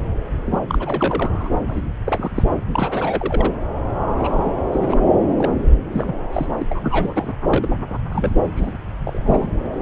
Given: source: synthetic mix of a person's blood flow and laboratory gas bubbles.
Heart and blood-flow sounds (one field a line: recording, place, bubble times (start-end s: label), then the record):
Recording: Doppler ultrasound of blood flow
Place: subclavian vein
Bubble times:
0.45-0.59 s: bubbles
0.68-1.50 s: bubbles
1.68-1.84 s: bubbles
2.05-2.31 s: bubbles
2.35-2.44 s: bubbles
2.71-3.51 s: bubbles
4.08-4.51 s: bubbles
4.72-5.00 s: bubbles
5.37-5.64 s: bubbles
5.92-6.14 s: bubbles
6.33-6.46 s: bubbles
6.58-6.66 s: bubbles
6.69-7.34 s: bubbles
7.48-7.68 s: bubbles
8.10-8.36 s: bubbles
8.56-8.77 s: bubbles
9.05-9.52 s: bubbles
From the record:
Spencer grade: 3 (all of the cardiac periods contain showers or single bubble signals, but not dominating or overriding the cardiac motion signals)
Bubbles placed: anywhere in the cardiac cycle